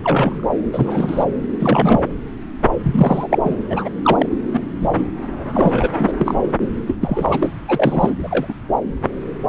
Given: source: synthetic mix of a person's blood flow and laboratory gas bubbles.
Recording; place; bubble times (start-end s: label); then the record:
Doppler ultrasound of blood flow; subclavian vein
0.03-0.46 s: bubbles
0.72-1.25 s: bubbles
1.59-2.06 s: bubbles
2.83-3.38 s: bubbles
3.43-3.55 s: bubbles
3.69-3.89 s: bubbles
4.03-4.29 s: bubbles
4.53-4.61 s: bubbles
4.81-4.88 s: bubbles
4.95-5.03 s: bubbles
5.53-5.89 s: bubbles
5.98-6.12 s: bubbles
6.18-6.35 s: bubbles
6.87-6.96 s: bubbles
7.01-7.48 s: bubbles
7.68-8.13 s: bubbles
8.22-8.54 s: bubbles
From the record:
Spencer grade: 3 (all of the cardiac periods contain showers or single bubble signals, but not dominating or overriding the cardiac motion signals); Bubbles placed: anywhere in the cardiac cycle